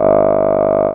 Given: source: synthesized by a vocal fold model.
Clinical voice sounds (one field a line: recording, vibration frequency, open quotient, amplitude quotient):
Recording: sustained vowel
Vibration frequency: 50 Hz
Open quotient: 0.1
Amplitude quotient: 1